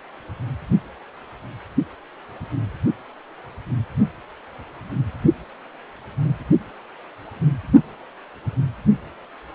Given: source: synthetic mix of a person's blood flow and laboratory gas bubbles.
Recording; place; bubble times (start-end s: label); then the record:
Doppler ultrasound of blood flow; precordium
6.24-6.35 s: bubbles
From the record:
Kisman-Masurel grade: 112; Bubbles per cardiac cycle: 1 to 2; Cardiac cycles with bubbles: 1 to 10%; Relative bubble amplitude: moderate (0.250 to 0.450); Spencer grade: 1 (occasional bubble signal discernible with the cardiac motion signal, with majority of cardiac periods free of bubbles); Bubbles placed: only in the low amplitude regions of the cardiac cycle